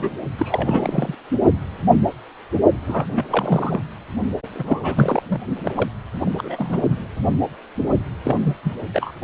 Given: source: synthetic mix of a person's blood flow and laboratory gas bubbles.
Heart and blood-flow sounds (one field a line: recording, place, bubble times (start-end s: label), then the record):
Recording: Doppler ultrasound of blood flow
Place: precordium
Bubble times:
0.00-0.10 s: bubbles
0.38-1.15 s: bubbles
2.86-3.06 s: bubbles
3.12-3.80 s: bubbles
4.54-5.22 s: bubbles
5.29-5.41 s: bubbles
5.63-5.89 s: bubbles
6.25-6.82 s: bubbles
8.23-8.54 s: bubbles
8.63-8.73 s: bubbles
8.94-9.11 s: bubbles
From the record:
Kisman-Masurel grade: 332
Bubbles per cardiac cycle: rolling drumbeat, 9 or more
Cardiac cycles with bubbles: 50 to 99%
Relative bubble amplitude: moderate (0.250 to 0.450)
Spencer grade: 3 (all of the cardiac periods contain showers or single bubble signals, but not dominating or overriding the cardiac motion signals)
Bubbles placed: only in the low amplitude regions of the cardiac cycle